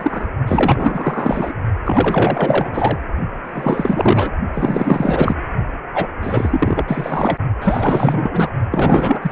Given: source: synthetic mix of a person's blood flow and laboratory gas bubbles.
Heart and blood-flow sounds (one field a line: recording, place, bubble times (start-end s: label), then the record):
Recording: Doppler ultrasound of blood flow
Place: precordium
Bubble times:
0.00-0.30 s: bubbles
0.47-1.52 s: bubbles
1.85-2.98 s: bubbles
3.44-4.32 s: bubbles
4.54-5.35 s: bubbles
5.94-6.07 s: bubbles
6.21-6.83 s: bubbles
6.87-7.37 s: bubbles
7.61-8.51 s: bubbles
8.71-9.32 s: bubbles
From the record:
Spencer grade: 4 (maximum detectable bubble signal sounding continuously throughout systole and diastole of every cardiac period, and overriding the amplitude of the normal cardiac signals)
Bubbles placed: only in the low amplitude regions of the cardiac cycle